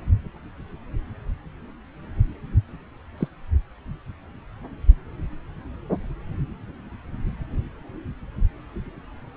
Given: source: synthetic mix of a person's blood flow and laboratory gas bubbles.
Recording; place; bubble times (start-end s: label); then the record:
Doppler ultrasound of blood flow; subclavian vein
3.17-3.28 s: bubbles
From the record:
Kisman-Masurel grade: 111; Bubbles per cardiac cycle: 1 to 2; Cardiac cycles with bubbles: 1 to 10%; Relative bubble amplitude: barely perceptible (0.100 to 0.250); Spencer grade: 1 (occasional bubble signal discernible with the cardiac motion signal, with majority of cardiac periods free of bubbles); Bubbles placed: anywhere in the cardiac cycle